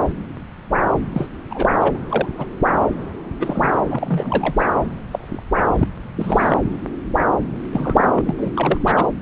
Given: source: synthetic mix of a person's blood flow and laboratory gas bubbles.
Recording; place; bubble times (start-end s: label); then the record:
Doppler ultrasound of blood flow; subclavian vein
1.12-1.28 s: bubbles
1.50-1.69 s: bubbles
1.80-1.98 s: bubbles
2.09-2.29 s: bubbles
2.38-2.46 s: bubbles
3.39-3.69 s: bubbles
3.90-4.66 s: bubbles
5.11-5.43 s: bubbles
5.78-5.86 s: bubbles
6.16-6.58 s: bubbles
7.72-8.21 s: bubbles
8.25-8.35 s: bubbles
8.38-8.78 s: bubbles
8.86-9.07 s: bubbles
From the record:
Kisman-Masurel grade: 232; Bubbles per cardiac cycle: several, 3 to 8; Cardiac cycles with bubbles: 50 to 99%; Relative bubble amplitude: moderate (0.250 to 0.450); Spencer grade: 3 (all of the cardiac periods contain showers or single bubble signals, but not dominating or overriding the cardiac motion signals); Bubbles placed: anywhere in the cardiac cycle